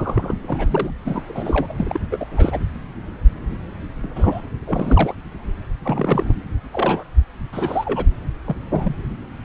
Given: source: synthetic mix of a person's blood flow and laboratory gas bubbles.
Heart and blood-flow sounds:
Doppler ultrasound of blood flow; subclavian vein
0.00-0.34 s: bubbles
0.43-0.91 s: bubbles
1.05-1.23 s: bubbles
1.28-1.74 s: bubbles
1.78-1.99 s: bubbles
2.11-2.60 s: bubbles
4.03-4.08 s: bubbles
4.16-4.42 s: bubbles
4.66-5.14 s: bubbles
5.83-6.34 s: bubbles
6.72-7.04 s: bubbles
7.52-8.06 s: bubbles
8.47-8.55 s: bubbles
8.72-8.95 s: bubbles
From the record:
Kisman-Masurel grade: 232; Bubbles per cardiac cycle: several, 3 to 8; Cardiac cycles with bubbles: 50 to 99%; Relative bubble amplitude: moderate (0.250 to 0.450); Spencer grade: 3 (all of the cardiac periods contain showers or single bubble signals, but not dominating or overriding the cardiac motion signals); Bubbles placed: anywhere in the cardiac cycle

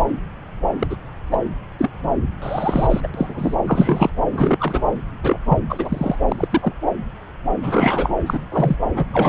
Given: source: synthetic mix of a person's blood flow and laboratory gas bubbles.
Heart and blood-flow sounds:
Doppler ultrasound of blood flow; subclavian vein
0.00-0.05 s: bubbles
0.79-0.96 s: bubbles
1.31-1.39 s: bubbles
1.78-1.90 s: bubbles
2.42-3.00 s: bubbles
3.03-3.08 s: bubbles
3.14-3.54 s: bubbles
3.66-4.10 s: bubbles
4.32-4.83 s: bubbles
5.23-5.40 s: bubbles
5.49-5.58 s: bubbles
5.68-6.16 s: bubbles
6.28-6.72 s: bubbles
7.63-8.11 s: bubbles
8.26-8.46 s: bubbles
8.51-8.76 s: bubbles
8.95-9.05 s: bubbles
9.12-9.29 s: bubbles
From the record:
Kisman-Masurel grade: 233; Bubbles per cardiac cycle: several, 3 to 8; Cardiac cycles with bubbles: 50 to 99%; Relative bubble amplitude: loud (0.450 to 0.775); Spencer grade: 3 (all of the cardiac periods contain showers or single bubble signals, but not dominating or overriding the cardiac motion signals); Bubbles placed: anywhere in the cardiac cycle

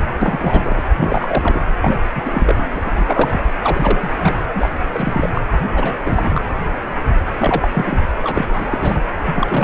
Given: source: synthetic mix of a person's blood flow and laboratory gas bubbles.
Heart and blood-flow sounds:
Doppler ultrasound of blood flow; precordium
0.00-0.08 s: bubbles
0.21-0.83 s: bubbles
0.97-1.59 s: bubbles
1.81-1.99 s: bubbles
2.15-2.66 s: bubbles
2.74-2.82 s: bubbles
2.85-3.52 s: bubbles
3.63-4.35 s: bubbles
4.55-4.69 s: bubbles
4.92-5.29 s: bubbles
5.33-5.42 s: bubbles
5.71-6.01 s: bubbles
6.04-6.42 s: bubbles
7.38-7.68 s: bubbles
7.71-8.02 s: bubbles
8.23-9.02 s: bubbles
9.27-9.64 s: bubbles
From the record:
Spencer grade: 3 (all of the cardiac periods contain showers or single bubble signals, but not dominating or overriding the cardiac motion signals); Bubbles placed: anywhere in the cardiac cycle

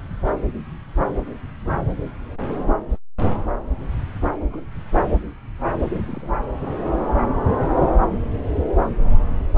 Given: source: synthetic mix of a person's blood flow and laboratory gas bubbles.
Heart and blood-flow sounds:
Doppler ultrasound of blood flow; subclavian vein
2.90-2.97 s: bubbles
4.48-4.65 s: bubbles
5.82-6.31 s: bubbles
7.17-7.22 s: bubbles
7.81-7.90 s: bubbles
From the record:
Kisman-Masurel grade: 121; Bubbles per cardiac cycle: 1 to 2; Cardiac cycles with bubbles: 10 to 50%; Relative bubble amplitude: barely perceptible (0.100 to 0.250); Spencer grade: 2 (many but less than half of the cardiac periods contain bubble signals, singularly or in groups); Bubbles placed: anywhere in the cardiac cycle

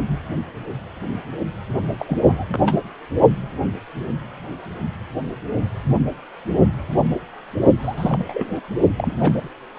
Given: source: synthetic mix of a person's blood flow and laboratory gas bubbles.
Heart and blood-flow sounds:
Doppler ultrasound of blood flow; precordium
1.99-2.18 s: bubbles
2.23-2.45 s: bubbles
2.47-2.64 s: bubbles
2.66-2.77 s: bubbles
7.79-8.61 s: bubbles
8.96-9.49 s: bubbles
From the record:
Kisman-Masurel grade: 221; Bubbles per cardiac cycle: several, 3 to 8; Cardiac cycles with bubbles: 10 to 50%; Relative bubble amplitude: barely perceptible (0.100 to 0.250); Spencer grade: 2 (many but less than half of the cardiac periods contain bubble signals, singularly or in groups); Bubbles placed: only in the low amplitude regions of the cardiac cycle

